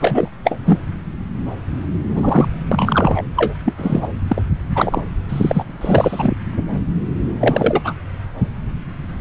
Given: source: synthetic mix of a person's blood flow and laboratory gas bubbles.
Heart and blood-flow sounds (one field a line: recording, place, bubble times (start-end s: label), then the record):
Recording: Doppler ultrasound of blood flow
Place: subclavian vein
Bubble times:
0.00-0.31 s: bubbles
0.44-0.58 s: bubbles
0.66-0.81 s: bubbles
2.11-2.48 s: bubbles
2.71-3.21 s: bubbles
3.36-3.54 s: bubbles
3.65-3.73 s: bubbles
3.77-4.07 s: bubbles
4.28-4.42 s: bubbles
4.75-5.02 s: bubbles
5.29-5.65 s: bubbles
5.81-6.37 s: bubbles
7.40-7.81 s: bubbles
7.84-7.93 s: bubbles
From the record:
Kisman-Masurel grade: 233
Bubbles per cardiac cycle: several, 3 to 8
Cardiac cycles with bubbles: 50 to 99%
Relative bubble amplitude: loud (0.450 to 0.775)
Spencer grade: 3 (all of the cardiac periods contain showers or single bubble signals, but not dominating or overriding the cardiac motion signals)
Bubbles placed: anywhere in the cardiac cycle